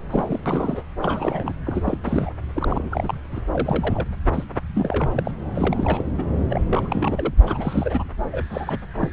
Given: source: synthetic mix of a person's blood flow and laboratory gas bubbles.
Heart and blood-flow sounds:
Doppler ultrasound of blood flow; subclavian vein
0.11-0.40 s: bubbles
0.46-0.82 s: bubbles
1.00-1.53 s: bubbles
1.66-1.97 s: bubbles
2.03-2.30 s: bubbles
2.53-3.19 s: bubbles
3.35-3.42 s: bubbles
3.51-4.06 s: bubbles
4.33-4.44 s: bubbles
4.75-5.10 s: bubbles
5.14-5.31 s: bubbles
5.54-6.05 s: bubbles
6.18-6.24 s: bubbles
6.50-6.62 s: bubbles
6.70-7.34 s: bubbles
7.46-8.04 s: bubbles
8.31-8.44 s: bubbles
8.49-8.79 s: bubbles
8.98-9.10 s: bubbles
From the record:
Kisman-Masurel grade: 342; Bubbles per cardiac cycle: rolling drumbeat, 9 or more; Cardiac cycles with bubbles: 100%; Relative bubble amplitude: moderate (0.250 to 0.450); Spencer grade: 3 (all of the cardiac periods contain showers or single bubble signals, but not dominating or overriding the cardiac motion signals); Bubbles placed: anywhere in the cardiac cycle

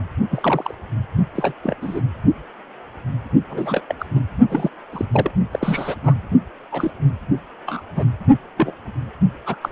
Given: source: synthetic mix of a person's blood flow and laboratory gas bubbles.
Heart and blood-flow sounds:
Doppler ultrasound of blood flow; precordium
0.31-0.74 s: bubbles
1.34-1.53 s: bubbles
1.63-1.76 s: bubbles
1.82-2.00 s: bubbles
3.49-3.81 s: bubbles
3.88-3.95 s: bubbles
3.98-4.05 s: bubbles
4.15-4.21 s: bubbles
4.50-4.69 s: bubbles
4.92-5.05 s: bubbles
5.12-5.31 s: bubbles
5.51-5.95 s: bubbles
6.03-6.14 s: bubbles
6.71-6.91 s: bubbles
7.66-7.83 s: bubbles
7.95-8.04 s: bubbles
8.57-8.72 s: bubbles
9.46-9.56 s: bubbles
9.63-9.69 s: bubbles
From the record:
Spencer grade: 3 (all of the cardiac periods contain showers or single bubble signals, but not dominating or overriding the cardiac motion signals); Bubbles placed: only in the low amplitude regions of the cardiac cycle

